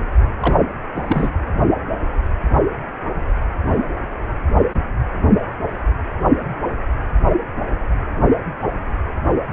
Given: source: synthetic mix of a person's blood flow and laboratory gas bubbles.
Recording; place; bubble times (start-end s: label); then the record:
Doppler ultrasound of blood flow; precordium
0.40-0.54 s: bubbles
0.94-1.31 s: bubbles
From the record:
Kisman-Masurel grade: 212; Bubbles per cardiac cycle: several, 3 to 8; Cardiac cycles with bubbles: 1 to 10%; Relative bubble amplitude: moderate (0.250 to 0.450); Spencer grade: 1 (occasional bubble signal discernible with the cardiac motion signal, with majority of cardiac periods free of bubbles); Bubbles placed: anywhere in the cardiac cycle